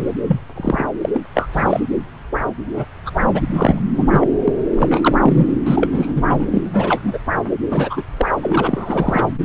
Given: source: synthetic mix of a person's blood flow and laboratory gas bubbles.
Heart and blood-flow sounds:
Doppler ultrasound of blood flow; subclavian vein
0.27-0.40 s: bubbles
0.56-0.89 s: bubbles
1.01-1.09 s: bubbles
1.13-1.21 s: bubbles
1.34-1.49 s: bubbles
1.53-1.80 s: bubbles
2.64-2.85 s: bubbles
3.06-3.10 s: bubbles
3.33-3.40 s: bubbles
3.50-3.80 s: bubbles
3.93-4.31 s: bubbles
4.44-4.52 s: bubbles
4.76-5.17 s: bubbles
5.23-5.46 s: bubbles
5.64-5.88 s: bubbles
5.92-6.47 s: bubbles
6.53-7.18 s: bubbles
7.68-8.04 s: bubbles
8.17-8.30 s: bubbles
8.42-9.25 s: bubbles
From the record:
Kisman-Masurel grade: 243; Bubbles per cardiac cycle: several, 3 to 8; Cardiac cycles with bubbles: 100%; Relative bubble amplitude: loud (0.450 to 0.775); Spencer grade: 3 (all of the cardiac periods contain showers or single bubble signals, but not dominating or overriding the cardiac motion signals); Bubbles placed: anywhere in the cardiac cycle

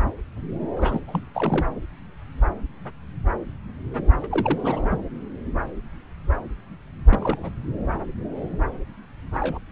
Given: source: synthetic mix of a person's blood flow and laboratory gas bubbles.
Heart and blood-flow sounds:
Doppler ultrasound of blood flow; subclavian vein
0.76-1.00 s: bubbles
1.07-1.20 s: bubbles
1.34-1.66 s: bubbles
4.23-4.27 s: bubbles
4.30-4.89 s: bubbles
4.91-4.98 s: bubbles
7.09-7.51 s: bubbles
9.35-9.59 s: bubbles
From the record:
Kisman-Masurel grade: 221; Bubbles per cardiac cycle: several, 3 to 8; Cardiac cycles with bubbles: 10 to 50%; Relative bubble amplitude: barely perceptible (0.100 to 0.250); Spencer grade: 2 (many but less than half of the cardiac periods contain bubble signals, singularly or in groups); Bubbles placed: anywhere in the cardiac cycle

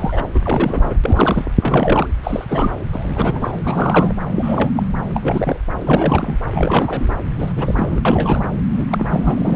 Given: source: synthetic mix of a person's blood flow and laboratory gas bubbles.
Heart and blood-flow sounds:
Doppler ultrasound of blood flow; subclavian vein
0.00-0.24 s: bubbles
0.34-0.40 s: bubbles
0.42-0.97 s: bubbles
1.03-1.45 s: bubbles
1.57-2.08 s: bubbles
2.23-2.45 s: bubbles
2.48-2.71 s: bubbles
2.92-3.59 s: bubbles
3.63-4.13 s: bubbles
4.35-4.70 s: bubbles
4.76-4.83 s: bubbles
5.14-5.59 s: bubbles
5.81-6.38 s: bubbles
6.51-7.14 s: bubbles
7.38-7.53 s: bubbles
7.56-8.01 s: bubbles
8.05-8.50 s: bubbles
8.75-8.86 s: bubbles
8.90-9.56 s: bubbles
From the record:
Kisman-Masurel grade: 342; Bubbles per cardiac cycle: rolling drumbeat, 9 or more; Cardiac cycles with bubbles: 100%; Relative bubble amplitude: moderate (0.250 to 0.450); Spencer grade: 3 (all of the cardiac periods contain showers or single bubble signals, but not dominating or overriding the cardiac motion signals); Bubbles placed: anywhere in the cardiac cycle

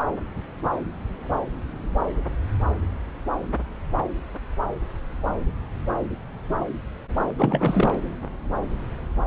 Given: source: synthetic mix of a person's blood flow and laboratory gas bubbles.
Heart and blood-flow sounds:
Doppler ultrasound of blood flow; subclavian vein
7.37-7.95 s: bubbles
From the record:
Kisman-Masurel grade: 212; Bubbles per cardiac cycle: several, 3 to 8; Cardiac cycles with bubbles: 1 to 10%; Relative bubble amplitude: moderate (0.250 to 0.450); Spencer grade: 1 (occasional bubble signal discernible with the cardiac motion signal, with majority of cardiac periods free of bubbles); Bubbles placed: anywhere in the cardiac cycle

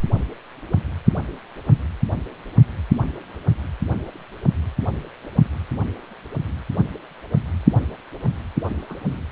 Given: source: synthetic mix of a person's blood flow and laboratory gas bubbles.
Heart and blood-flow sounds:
Doppler ultrasound of blood flow; precordium
8.89-8.96 s: bubbles
9.12-9.22 s: bubbles
From the record:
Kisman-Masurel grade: 111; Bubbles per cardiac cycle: 1 to 2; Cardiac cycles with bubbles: 1 to 10%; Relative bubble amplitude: barely perceptible (0.100 to 0.250); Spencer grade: 1 (occasional bubble signal discernible with the cardiac motion signal, with majority of cardiac periods free of bubbles); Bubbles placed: anywhere in the cardiac cycle

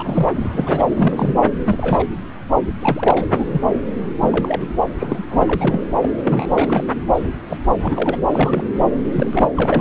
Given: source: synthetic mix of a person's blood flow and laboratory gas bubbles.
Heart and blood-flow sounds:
Doppler ultrasound of blood flow; subclavian vein
0.00-0.27 s: bubbles
0.33-0.49 s: bubbles
0.52-0.84 s: bubbles
0.96-1.35 s: bubbles
1.66-2.05 s: bubbles
2.80-3.25 s: bubbles
3.31-3.61 s: bubbles
4.20-4.66 s: bubbles
4.99-5.45 s: bubbles
5.48-5.82 s: bubbles
6.02-6.09 s: bubbles
6.17-6.46 s: bubbles
6.53-6.84 s: bubbles
7.14-7.29 s: bubbles
7.48-7.58 s: bubbles
7.83-8.21 s: bubbles
8.33-8.65 s: bubbles
9.06-9.48 s: bubbles
9.54-9.81 s: bubbles
From the record:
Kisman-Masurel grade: 242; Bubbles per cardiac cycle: several, 3 to 8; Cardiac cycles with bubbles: 100%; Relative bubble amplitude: moderate (0.250 to 0.450); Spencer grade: 3 (all of the cardiac periods contain showers or single bubble signals, but not dominating or overriding the cardiac motion signals); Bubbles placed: anywhere in the cardiac cycle

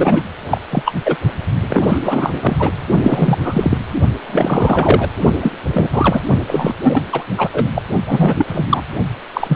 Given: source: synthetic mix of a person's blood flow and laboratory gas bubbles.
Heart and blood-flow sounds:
Doppler ultrasound of blood flow; precordium
0.00-0.22 s: bubbles
0.51-0.61 s: bubbles
0.70-0.93 s: bubbles
1.04-1.17 s: bubbles
1.70-1.98 s: bubbles
2.01-2.71 s: bubbles
3.03-3.38 s: bubbles
3.41-3.77 s: bubbles
4.28-5.09 s: bubbles
5.40-5.52 s: bubbles
5.73-5.89 s: bubbles
5.92-6.21 s: bubbles
6.48-6.74 s: bubbles
6.84-7.04 s: bubbles
7.12-7.25 s: bubbles
7.38-7.49 s: bubbles
7.52-7.70 s: bubbles
7.75-7.83 s: bubbles
8.05-8.34 s: bubbles
8.38-8.66 s: bubbles
8.69-8.82 s: bubbles
9.33-9.56 s: bubbles
From the record:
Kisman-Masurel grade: 343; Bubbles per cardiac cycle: rolling drumbeat, 9 or more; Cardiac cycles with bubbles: 100%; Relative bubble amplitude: loud (0.450 to 0.775); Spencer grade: 3 (all of the cardiac periods contain showers or single bubble signals, but not dominating or overriding the cardiac motion signals); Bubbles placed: only in the low amplitude regions of the cardiac cycle

